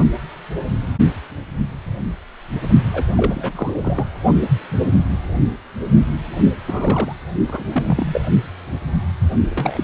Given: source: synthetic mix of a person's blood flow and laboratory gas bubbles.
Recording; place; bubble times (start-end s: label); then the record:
Doppler ultrasound of blood flow; precordium
2.94-3.05 s: bubbles
3.16-4.04 s: bubbles
6.67-7.14 s: bubbles
7.47-7.63 s: bubbles
7.69-8.21 s: bubbles
9.51-9.84 s: bubbles
From the record:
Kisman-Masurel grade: 222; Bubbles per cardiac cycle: several, 3 to 8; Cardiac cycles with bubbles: 10 to 50%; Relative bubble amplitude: moderate (0.250 to 0.450); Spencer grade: 2 (many but less than half of the cardiac periods contain bubble signals, singularly or in groups); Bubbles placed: anywhere in the cardiac cycle